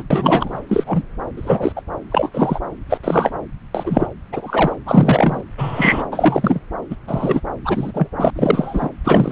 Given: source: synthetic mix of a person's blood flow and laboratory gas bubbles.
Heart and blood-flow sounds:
Doppler ultrasound of blood flow; subclavian vein
0.00-0.04 s: bubbles
0.10-0.60 s: bubbles
0.69-1.03 s: bubbles
1.36-1.73 s: bubbles
1.76-1.82 s: bubbles
2.10-2.29 s: bubbles
2.34-2.59 s: bubbles
2.90-2.97 s: bubbles
3.03-3.32 s: bubbles
3.74-4.08 s: bubbles
4.32-4.76 s: bubbles
4.86-5.41 s: bubbles
5.58-6.07 s: bubbles
6.12-6.60 s: bubbles
6.90-6.96 s: bubbles
7.07-7.41 s: bubbles
7.65-8.10 s: bubbles
8.18-8.30 s: bubbles
8.35-8.89 s: bubbles
9.04-9.32 s: bubbles
From the record:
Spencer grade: 3 (all of the cardiac periods contain showers or single bubble signals, but not dominating or overriding the cardiac motion signals); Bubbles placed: anywhere in the cardiac cycle

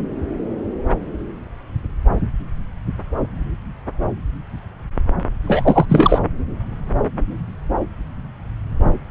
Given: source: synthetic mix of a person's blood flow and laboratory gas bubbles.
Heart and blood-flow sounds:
Doppler ultrasound of blood flow; subclavian vein
5.47-5.86 s: bubbles
5.89-6.19 s: bubbles
From the record:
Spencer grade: 2 (many but less than half of the cardiac periods contain bubble signals, singularly or in groups); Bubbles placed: anywhere in the cardiac cycle

